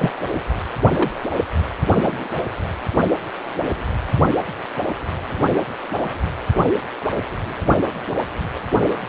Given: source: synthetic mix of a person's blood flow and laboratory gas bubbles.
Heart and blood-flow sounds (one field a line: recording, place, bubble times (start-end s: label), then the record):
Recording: Doppler ultrasound of blood flow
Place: precordium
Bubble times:
0.00-0.12 s: bubbles
0.91-1.25 s: bubbles
1.86-2.29 s: bubbles
From the record:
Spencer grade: 2 (many but less than half of the cardiac periods contain bubble signals, singularly or in groups)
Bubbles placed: anywhere in the cardiac cycle